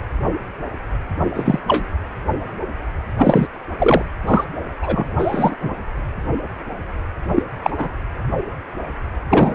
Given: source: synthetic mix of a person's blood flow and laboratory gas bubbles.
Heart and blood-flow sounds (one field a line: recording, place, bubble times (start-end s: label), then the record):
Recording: Doppler ultrasound of blood flow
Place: precordium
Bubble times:
1.34-1.59 s: bubbles
1.68-1.84 s: bubbles
3.18-3.47 s: bubbles
3.78-4.02 s: bubbles
4.27-4.44 s: bubbles
4.81-5.06 s: bubbles
5.17-5.54 s: bubbles
5.60-5.71 s: bubbles
7.35-7.42 s: bubbles
7.62-7.70 s: bubbles
7.77-7.90 s: bubbles
9.29-9.54 s: bubbles
From the record:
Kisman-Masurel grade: 233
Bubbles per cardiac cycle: several, 3 to 8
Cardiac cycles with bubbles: 50 to 99%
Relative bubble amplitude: loud (0.450 to 0.775)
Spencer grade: 3 (all of the cardiac periods contain showers or single bubble signals, but not dominating or overriding the cardiac motion signals)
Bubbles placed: anywhere in the cardiac cycle